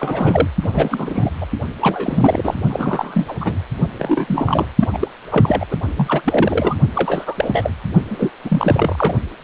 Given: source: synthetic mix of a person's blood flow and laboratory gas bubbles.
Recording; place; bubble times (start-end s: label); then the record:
Doppler ultrasound of blood flow; precordium
0.00-0.47 s: bubbles
0.62-1.30 s: bubbles
1.40-1.46 s: bubbles
1.81-2.54 s: bubbles
2.69-3.35 s: bubbles
3.40-3.60 s: bubbles
3.98-4.67 s: bubbles
4.80-4.89 s: bubbles
4.91-5.08 s: bubbles
5.31-5.66 s: bubbles
5.70-5.76 s: bubbles
5.96-6.21 s: bubbles
6.24-6.74 s: bubbles
6.94-7.71 s: bubbles
8.07-8.30 s: bubbles
8.44-9.17 s: bubbles
From the record:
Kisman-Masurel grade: 342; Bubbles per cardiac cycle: rolling drumbeat, 9 or more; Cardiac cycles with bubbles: 100%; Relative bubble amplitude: moderate (0.250 to 0.450); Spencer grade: 3 (all of the cardiac periods contain showers or single bubble signals, but not dominating or overriding the cardiac motion signals); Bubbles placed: only in the low amplitude regions of the cardiac cycle